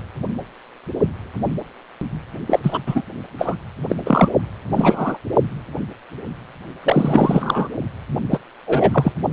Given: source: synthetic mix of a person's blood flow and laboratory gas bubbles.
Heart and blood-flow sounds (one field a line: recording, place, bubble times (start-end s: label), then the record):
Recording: Doppler ultrasound of blood flow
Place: precordium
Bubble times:
2.47-2.60 s: bubbles
2.63-2.81 s: bubbles
2.86-3.03 s: bubbles
3.38-3.56 s: bubbles
3.88-3.95 s: bubbles
4.05-4.28 s: bubbles
4.73-5.17 s: bubbles
6.80-7.67 s: bubbles
8.31-8.39 s: bubbles
8.67-9.12 s: bubbles
From the record:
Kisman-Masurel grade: 333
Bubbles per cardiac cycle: rolling drumbeat, 9 or more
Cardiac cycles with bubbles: 50 to 99%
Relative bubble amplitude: loud (0.450 to 0.775)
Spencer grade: 3 (all of the cardiac periods contain showers or single bubble signals, but not dominating or overriding the cardiac motion signals)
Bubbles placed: only in the low amplitude regions of the cardiac cycle